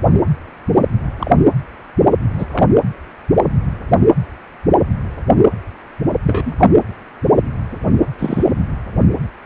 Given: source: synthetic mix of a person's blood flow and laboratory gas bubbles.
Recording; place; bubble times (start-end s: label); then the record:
Doppler ultrasound of blood flow; precordium
1.19-1.36 s: bubbles
2.38-2.46 s: bubbles
2.52-2.66 s: bubbles
6.25-6.54 s: bubbles
6.58-6.65 s: bubbles
8.18-8.52 s: bubbles
From the record:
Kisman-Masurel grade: 123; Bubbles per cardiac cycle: 1 to 2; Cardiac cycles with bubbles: 10 to 50%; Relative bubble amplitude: loud (0.450 to 0.775); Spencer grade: 2 (many but less than half of the cardiac periods contain bubble signals, singularly or in groups); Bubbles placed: anywhere in the cardiac cycle